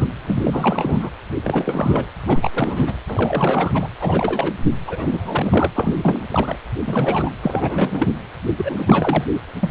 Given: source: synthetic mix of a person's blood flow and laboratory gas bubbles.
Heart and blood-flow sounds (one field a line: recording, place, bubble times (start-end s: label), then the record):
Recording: Doppler ultrasound of blood flow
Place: precordium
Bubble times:
0.00-0.10 s: bubbles
0.24-1.10 s: bubbles
1.44-2.06 s: bubbles
2.26-2.50 s: bubbles
2.53-2.94 s: bubbles
3.07-3.88 s: bubbles
4.00-4.58 s: bubbles
4.87-5.71 s: bubbles
5.75-5.95 s: bubbles
6.02-6.26 s: bubbles
6.30-6.55 s: bubbles
6.87-7.30 s: bubbles
7.42-8.10 s: bubbles
8.57-9.25 s: bubbles
9.61-9.70 s: bubbles
From the record:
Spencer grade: 3 (all of the cardiac periods contain showers or single bubble signals, but not dominating or overriding the cardiac motion signals)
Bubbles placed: anywhere in the cardiac cycle